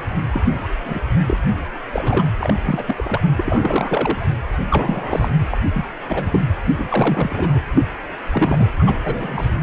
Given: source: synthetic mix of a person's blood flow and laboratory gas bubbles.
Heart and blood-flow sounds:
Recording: Doppler ultrasound of blood flow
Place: precordium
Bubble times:
0.31-0.69 s: bubbles
0.84-0.99 s: bubbles
1.26-1.37 s: bubbles
1.92-2.26 s: bubbles
2.38-2.54 s: bubbles
2.63-2.84 s: bubbles
2.87-3.21 s: bubbles
3.36-4.32 s: bubbles
4.70-5.31 s: bubbles
5.52-5.58 s: bubbles
5.74-5.85 s: bubbles
6.08-6.46 s: bubbles
6.78-7.59 s: bubbles
7.74-7.82 s: bubbles
8.31-8.69 s: bubbles
8.79-9.51 s: bubbles
From the record:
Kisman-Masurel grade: 242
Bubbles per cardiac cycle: several, 3 to 8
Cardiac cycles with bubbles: 100%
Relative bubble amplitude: moderate (0.250 to 0.450)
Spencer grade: 3 (all of the cardiac periods contain showers or single bubble signals, but not dominating or overriding the cardiac motion signals)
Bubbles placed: anywhere in the cardiac cycle

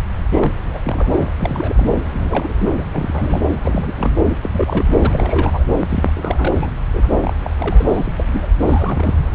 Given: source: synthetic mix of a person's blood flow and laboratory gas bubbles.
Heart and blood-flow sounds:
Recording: Doppler ultrasound of blood flow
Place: subclavian vein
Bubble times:
0.31-0.52 s: bubbles
0.73-0.80 s: bubbles
0.84-1.30 s: bubbles
1.37-1.90 s: bubbles
2.10-2.73 s: bubbles
2.76-2.84 s: bubbles
2.91-3.46 s: bubbles
3.62-4.22 s: bubbles
4.29-4.38 s: bubbles
4.42-4.50 s: bubbles
4.52-4.90 s: bubbles
5.01-5.64 s: bubbles
5.89-6.70 s: bubbles
6.93-7.06 s: bubbles
7.11-7.33 s: bubbles
7.43-7.50 s: bubbles
7.55-8.24 s: bubbles
8.26-8.47 s: bubbles
8.61-9.29 s: bubbles
From the record:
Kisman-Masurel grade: 342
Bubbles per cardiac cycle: rolling drumbeat, 9 or more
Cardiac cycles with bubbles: 100%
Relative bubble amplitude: moderate (0.250 to 0.450)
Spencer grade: 3 (all of the cardiac periods contain showers or single bubble signals, but not dominating or overriding the cardiac motion signals)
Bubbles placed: anywhere in the cardiac cycle

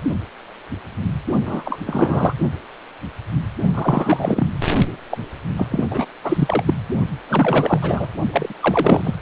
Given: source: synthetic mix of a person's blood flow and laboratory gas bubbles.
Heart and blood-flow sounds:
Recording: Doppler ultrasound of blood flow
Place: precordium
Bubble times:
1.46-1.79 s: bubbles
1.87-2.33 s: bubbles
3.74-4.63 s: bubbles
5.10-5.18 s: bubbles
5.56-5.67 s: bubbles
5.70-5.84 s: bubbles
5.89-6.07 s: bubbles
6.23-6.63 s: bubbles
6.65-6.73 s: bubbles
7.28-8.08 s: bubbles
8.32-8.53 s: bubbles
8.61-9.15 s: bubbles
From the record:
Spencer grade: 3 (all of the cardiac periods contain showers or single bubble signals, but not dominating or overriding the cardiac motion signals)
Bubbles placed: only in the low amplitude regions of the cardiac cycle

